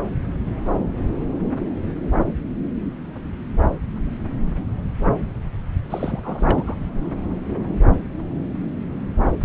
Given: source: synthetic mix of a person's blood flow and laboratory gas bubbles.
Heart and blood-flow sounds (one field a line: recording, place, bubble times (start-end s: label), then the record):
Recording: Doppler ultrasound of blood flow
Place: subclavian vein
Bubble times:
5.90-6.20 s: bubbles
6.23-6.75 s: bubbles
From the record:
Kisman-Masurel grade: 211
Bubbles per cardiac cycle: several, 3 to 8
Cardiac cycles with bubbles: 1 to 10%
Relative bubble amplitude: barely perceptible (0.100 to 0.250)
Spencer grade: 1 (occasional bubble signal discernible with the cardiac motion signal, with majority of cardiac periods free of bubbles)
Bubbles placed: anywhere in the cardiac cycle